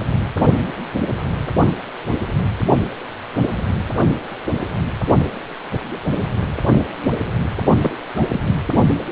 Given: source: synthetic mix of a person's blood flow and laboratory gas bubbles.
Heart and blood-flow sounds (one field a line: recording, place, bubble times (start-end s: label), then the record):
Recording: Doppler ultrasound of blood flow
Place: precordium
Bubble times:
7.78-7.98 s: bubbles
8.16-8.24 s: bubbles
8.28-8.40 s: bubbles
From the record:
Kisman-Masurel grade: 212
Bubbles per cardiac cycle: several, 3 to 8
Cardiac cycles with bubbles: 1 to 10%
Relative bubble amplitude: moderate (0.250 to 0.450)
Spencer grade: 1 (occasional bubble signal discernible with the cardiac motion signal, with majority of cardiac periods free of bubbles)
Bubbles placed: only in the low amplitude regions of the cardiac cycle